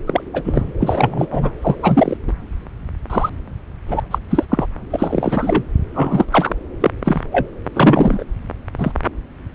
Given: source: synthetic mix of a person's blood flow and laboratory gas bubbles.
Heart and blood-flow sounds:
Doppler ultrasound of blood flow; subclavian vein
0.07-0.22 s: bubbles
0.34-0.72 s: bubbles
0.79-1.27 s: bubbles
1.30-1.51 s: bubbles
1.62-1.75 s: bubbles
1.82-2.17 s: bubbles
2.27-2.33 s: bubbles
3.10-3.30 s: bubbles
3.88-4.00 s: bubbles
4.11-4.19 s: bubbles
4.29-4.46 s: bubbles
4.50-4.67 s: bubbles
4.90-5.63 s: bubbles
5.94-6.25 s: bubbles
6.32-6.54 s: bubbles
6.81-6.91 s: bubbles
7.04-7.21 s: bubbles
7.32-7.46 s: bubbles
7.73-8.23 s: bubbles
8.77-8.91 s: bubbles
From the record:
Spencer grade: 3 (all of the cardiac periods contain showers or single bubble signals, but not dominating or overriding the cardiac motion signals); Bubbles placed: anywhere in the cardiac cycle

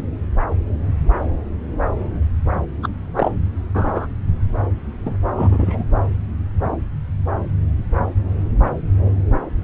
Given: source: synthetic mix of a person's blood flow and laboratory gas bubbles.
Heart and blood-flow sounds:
Doppler ultrasound of blood flow; subclavian vein
2.83-2.88 s: bubbles
3.16-3.31 s: bubbles
3.74-4.07 s: bubbles
5.05-5.13 s: bubbles
5.34-5.84 s: bubbles
From the record:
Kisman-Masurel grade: 122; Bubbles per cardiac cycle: 1 to 2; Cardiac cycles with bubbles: 10 to 50%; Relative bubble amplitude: moderate (0.250 to 0.450); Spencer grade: 2 (many but less than half of the cardiac periods contain bubble signals, singularly or in groups); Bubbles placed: anywhere in the cardiac cycle

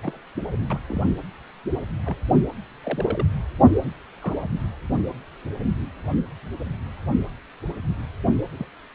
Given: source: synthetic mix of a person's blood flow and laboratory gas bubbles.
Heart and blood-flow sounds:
Doppler ultrasound of blood flow; precordium
0.03-0.19 s: bubbles
0.70-0.79 s: bubbles
0.87-1.02 s: bubbles
2.05-2.16 s: bubbles
2.83-3.25 s: bubbles
4.22-4.33 s: bubbles
8.58-8.66 s: bubbles
From the record:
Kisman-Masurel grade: 121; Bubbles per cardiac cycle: 1 to 2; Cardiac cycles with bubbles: 10 to 50%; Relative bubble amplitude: barely perceptible (0.100 to 0.250); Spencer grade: 2 (many but less than half of the cardiac periods contain bubble signals, singularly or in groups); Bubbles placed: anywhere in the cardiac cycle

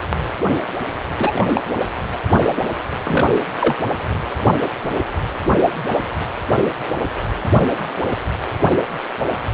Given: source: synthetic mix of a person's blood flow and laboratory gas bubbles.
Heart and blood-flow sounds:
Doppler ultrasound of blood flow; precordium
1.19-1.44 s: bubbles
1.54-1.62 s: bubbles
3.04-3.37 s: bubbles
3.60-3.76 s: bubbles
From the record:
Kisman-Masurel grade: 123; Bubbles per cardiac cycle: 1 to 2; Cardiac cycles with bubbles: 10 to 50%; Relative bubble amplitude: loud (0.450 to 0.775); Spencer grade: 2 (many but less than half of the cardiac periods contain bubble signals, singularly or in groups); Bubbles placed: anywhere in the cardiac cycle

